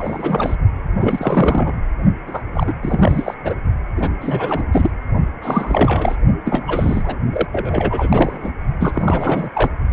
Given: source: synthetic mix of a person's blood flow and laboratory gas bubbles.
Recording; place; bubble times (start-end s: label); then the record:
Doppler ultrasound of blood flow; precordium
0.00-0.55 s: bubbles
1.00-1.73 s: bubbles
2.27-2.44 s: bubbles
2.55-2.73 s: bubbles
2.82-3.34 s: bubbles
3.44-3.54 s: bubbles
3.96-4.09 s: bubbles
4.21-4.62 s: bubbles
4.71-4.91 s: bubbles
5.42-6.16 s: bubbles
6.45-7.16 s: bubbles
7.33-7.46 s: bubbles
7.52-8.50 s: bubbles
8.80-9.50 s: bubbles
9.54-9.70 s: bubbles
From the record:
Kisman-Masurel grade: 342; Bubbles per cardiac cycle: rolling drumbeat, 9 or more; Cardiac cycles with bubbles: 100%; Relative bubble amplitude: moderate (0.250 to 0.450); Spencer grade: 3 (all of the cardiac periods contain showers or single bubble signals, but not dominating or overriding the cardiac motion signals); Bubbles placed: only in the low amplitude regions of the cardiac cycle